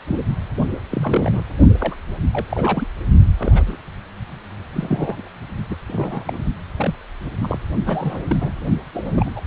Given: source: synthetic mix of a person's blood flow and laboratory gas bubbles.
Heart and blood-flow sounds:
Doppler ultrasound of blood flow; precordium
0.07-0.16 s: bubbles
0.74-0.79 s: bubbles
0.90-1.42 s: bubbles
1.79-1.94 s: bubbles
2.32-2.46 s: bubbles
2.49-2.88 s: bubbles
3.38-3.76 s: bubbles
4.72-5.29 s: bubbles
5.70-5.77 s: bubbles
5.88-6.45 s: bubbles
6.76-6.96 s: bubbles
7.42-7.58 s: bubbles
7.86-8.21 s: bubbles
8.28-8.37 s: bubbles
8.40-8.51 s: bubbles
8.93-9.30 s: bubbles
9.35-9.41 s: bubbles
From the record:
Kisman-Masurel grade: 242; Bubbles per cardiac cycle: several, 3 to 8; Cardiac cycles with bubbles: 100%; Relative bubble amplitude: moderate (0.250 to 0.450); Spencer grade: 3 (all of the cardiac periods contain showers or single bubble signals, but not dominating or overriding the cardiac motion signals); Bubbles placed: only in the low amplitude regions of the cardiac cycle

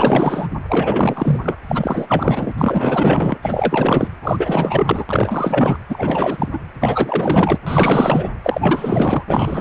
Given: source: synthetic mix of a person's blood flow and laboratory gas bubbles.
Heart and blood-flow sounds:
Doppler ultrasound of blood flow; precordium
0.00-0.48 s: bubbles
0.68-1.57 s: bubbles
1.68-2.06 s: bubbles
2.08-2.52 s: bubbles
2.58-3.37 s: bubbles
3.42-4.07 s: bubbles
4.22-5.05 s: bubbles
5.09-5.78 s: bubbles
5.88-6.49 s: bubbles
6.52-6.59 s: bubbles
6.79-7.58 s: bubbles
7.66-8.29 s: bubbles
8.44-9.24 s: bubbles
9.27-9.61 s: bubbles
From the record:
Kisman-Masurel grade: 444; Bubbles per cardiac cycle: continuous sound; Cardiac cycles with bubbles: 100%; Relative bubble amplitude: maximal (0.775 to 0.999); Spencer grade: 4 (maximum detectable bubble signal sounding continuously throughout systole and diastole of every cardiac period, and overriding the amplitude of the normal cardiac signals); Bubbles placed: anywhere in the cardiac cycle

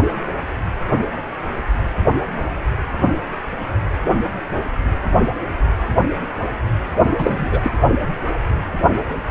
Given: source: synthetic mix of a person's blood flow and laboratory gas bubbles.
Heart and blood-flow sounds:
Doppler ultrasound of blood flow; precordium
7.18-7.61 s: bubbles
7.63-7.73 s: bubbles
From the record:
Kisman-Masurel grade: 213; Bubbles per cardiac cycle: several, 3 to 8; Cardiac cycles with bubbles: 1 to 10%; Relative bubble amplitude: loud (0.450 to 0.775); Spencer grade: 1 (occasional bubble signal discernible with the cardiac motion signal, with majority of cardiac periods free of bubbles); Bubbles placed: anywhere in the cardiac cycle

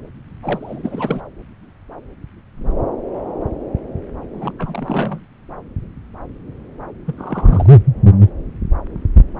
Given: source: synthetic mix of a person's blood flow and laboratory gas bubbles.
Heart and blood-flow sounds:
Doppler ultrasound of blood flow; subclavian vein
0.42-1.22 s: bubbles
4.33-4.52 s: bubbles
4.58-5.20 s: bubbles
7.05-7.78 s: bubbles
From the record:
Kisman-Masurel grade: 222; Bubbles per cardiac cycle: several, 3 to 8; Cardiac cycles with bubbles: 10 to 50%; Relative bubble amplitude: moderate (0.250 to 0.450); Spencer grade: 2 (many but less than half of the cardiac periods contain bubble signals, singularly or in groups); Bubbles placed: anywhere in the cardiac cycle

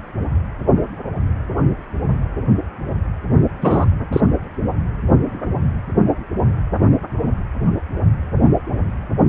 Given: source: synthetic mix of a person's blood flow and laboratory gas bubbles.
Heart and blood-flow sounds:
Doppler ultrasound of blood flow; precordium
3.61-3.86 s: bubbles
4.12-4.20 s: bubbles
From the record:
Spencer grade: 2 (many but less than half of the cardiac periods contain bubble signals, singularly or in groups); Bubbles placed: anywhere in the cardiac cycle

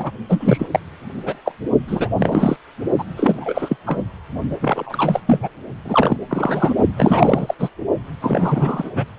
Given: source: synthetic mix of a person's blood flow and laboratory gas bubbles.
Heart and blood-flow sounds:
Doppler ultrasound of blood flow; precordium
0.00-0.12 s: bubbles
0.29-0.79 s: bubbles
1.26-1.34 s: bubbles
1.46-1.52 s: bubbles
1.88-2.09 s: bubbles
2.15-2.57 s: bubbles
2.98-3.04 s: bubbles
3.17-3.76 s: bubbles
3.86-4.04 s: bubbles
4.60-5.20 s: bubbles
5.26-5.48 s: bubbles
5.84-6.17 s: bubbles
6.27-6.72 s: bubbles
6.96-7.54 s: bubbles
7.59-7.70 s: bubbles
8.21-8.90 s: bubbles
8.95-9.05 s: bubbles
From the record:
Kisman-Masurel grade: 343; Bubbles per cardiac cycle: rolling drumbeat, 9 or more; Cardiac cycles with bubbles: 100%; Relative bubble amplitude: loud (0.450 to 0.775); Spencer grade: 3 (all of the cardiac periods contain showers or single bubble signals, but not dominating or overriding the cardiac motion signals); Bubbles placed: only in the low amplitude regions of the cardiac cycle

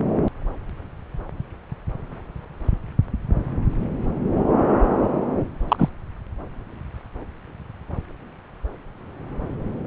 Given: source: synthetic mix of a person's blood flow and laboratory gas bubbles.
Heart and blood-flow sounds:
Doppler ultrasound of blood flow; subclavian vein
5.68-5.89 s: bubbles
From the record:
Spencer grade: 1 (occasional bubble signal discernible with the cardiac motion signal, with majority of cardiac periods free of bubbles); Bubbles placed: anywhere in the cardiac cycle

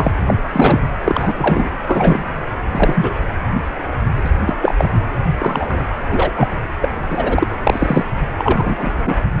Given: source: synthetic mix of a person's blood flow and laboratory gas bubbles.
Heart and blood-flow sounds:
Doppler ultrasound of blood flow; precordium
0.00-0.11 s: bubbles
0.26-0.34 s: bubbles
0.53-0.87 s: bubbles
1.04-1.33 s: bubbles
1.38-1.69 s: bubbles
1.86-2.23 s: bubbles
2.72-3.14 s: bubbles
4.24-4.31 s: bubbles
4.46-4.54 s: bubbles
4.61-4.75 s: bubbles
4.78-4.89 s: bubbles
5.38-5.87 s: bubbles
6.09-6.32 s: bubbles
6.36-6.48 s: bubbles
6.81-7.47 s: bubbles
7.64-8.06 s: bubbles
8.38-9.21 s: bubbles
9.38-9.40 s: bubbles
From the record:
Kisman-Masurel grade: 233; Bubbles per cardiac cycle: several, 3 to 8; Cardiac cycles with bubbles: 50 to 99%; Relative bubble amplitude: loud (0.450 to 0.775); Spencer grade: 3 (all of the cardiac periods contain showers or single bubble signals, but not dominating or overriding the cardiac motion signals); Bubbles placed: anywhere in the cardiac cycle

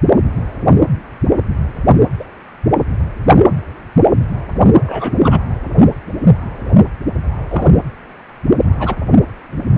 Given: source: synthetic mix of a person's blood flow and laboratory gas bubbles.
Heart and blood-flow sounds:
Doppler ultrasound of blood flow; precordium
2.19-2.24 s: bubbles
4.85-5.39 s: bubbles
7.49-7.76 s: bubbles
8.79-8.96 s: bubbles
From the record:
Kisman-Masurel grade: 123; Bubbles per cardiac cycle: 1 to 2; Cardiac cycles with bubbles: 10 to 50%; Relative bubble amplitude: loud (0.450 to 0.775); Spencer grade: 2 (many but less than half of the cardiac periods contain bubble signals, singularly or in groups); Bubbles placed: anywhere in the cardiac cycle

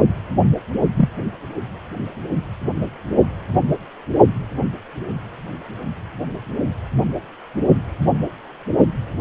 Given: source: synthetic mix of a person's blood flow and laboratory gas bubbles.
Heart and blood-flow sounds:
Doppler ultrasound of blood flow; precordium
0.96-1.09 s: bubbles
From the record:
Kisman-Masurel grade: 123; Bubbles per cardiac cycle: 1 to 2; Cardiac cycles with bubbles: 10 to 50%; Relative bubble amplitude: loud (0.450 to 0.775); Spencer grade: 2 (many but less than half of the cardiac periods contain bubble signals, singularly or in groups); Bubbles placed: only in the low amplitude regions of the cardiac cycle

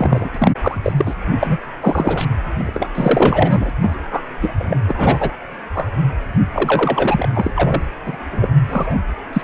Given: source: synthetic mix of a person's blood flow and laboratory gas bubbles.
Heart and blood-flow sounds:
Doppler ultrasound of blood flow; precordium
0.00-0.29 s: bubbles
0.34-0.51 s: bubbles
0.61-0.78 s: bubbles
0.83-0.93 s: bubbles
0.97-1.15 s: bubbles
1.41-1.57 s: bubbles
1.81-2.25 s: bubbles
2.57-3.70 s: bubbles
3.81-3.95 s: bubbles
4.12-4.21 s: bubbles
4.41-4.77 s: bubbles
4.88-5.37 s: bubbles
5.74-5.91 s: bubbles
6.54-7.29 s: bubbles
7.36-7.51 s: bubbles
7.54-7.83 s: bubbles
8.05-8.17 s: bubbles
8.32-8.48 s: bubbles
8.69-8.98 s: bubbles
9.33-9.42 s: bubbles
From the record:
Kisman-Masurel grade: 243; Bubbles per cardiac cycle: several, 3 to 8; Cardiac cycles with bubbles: 100%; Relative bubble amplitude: loud (0.450 to 0.775); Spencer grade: 3 (all of the cardiac periods contain showers or single bubble signals, but not dominating or overriding the cardiac motion signals); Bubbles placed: anywhere in the cardiac cycle

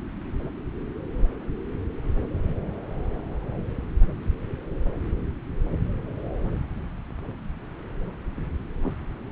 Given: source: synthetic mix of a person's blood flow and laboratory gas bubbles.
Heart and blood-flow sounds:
Doppler ultrasound of blood flow; subclavian vein
8.83-8.91 s: bubbles
From the record:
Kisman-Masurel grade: 111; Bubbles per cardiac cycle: 1 to 2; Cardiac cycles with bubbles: 1 to 10%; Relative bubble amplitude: barely perceptible (0.100 to 0.250); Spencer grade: 1 (occasional bubble signal discernible with the cardiac motion signal, with majority of cardiac periods free of bubbles); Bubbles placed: anywhere in the cardiac cycle

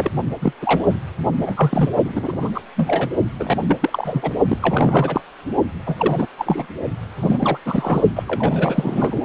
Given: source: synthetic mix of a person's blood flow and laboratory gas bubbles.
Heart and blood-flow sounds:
Doppler ultrasound of blood flow; precordium
0.00-0.10 s: bubbles
0.41-0.53 s: bubbles
0.62-0.88 s: bubbles
1.41-1.89 s: bubbles
2.04-2.51 s: bubbles
2.54-2.61 s: bubbles
2.76-3.09 s: bubbles
3.40-3.56 s: bubbles
3.61-3.76 s: bubbles
3.81-4.31 s: bubbles
4.48-4.58 s: bubbles
4.62-5.21 s: bubbles
5.86-6.27 s: bubbles
6.38-6.67 s: bubbles
7.20-7.58 s: bubbles
7.66-8.02 s: bubbles
8.15-8.24 s: bubbles
8.27-9.21 s: bubbles
From the record:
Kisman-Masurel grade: 342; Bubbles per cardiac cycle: rolling drumbeat, 9 or more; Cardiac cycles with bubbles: 100%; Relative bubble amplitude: moderate (0.250 to 0.450); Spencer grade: 3 (all of the cardiac periods contain showers or single bubble signals, but not dominating or overriding the cardiac motion signals); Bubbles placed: only in the low amplitude regions of the cardiac cycle

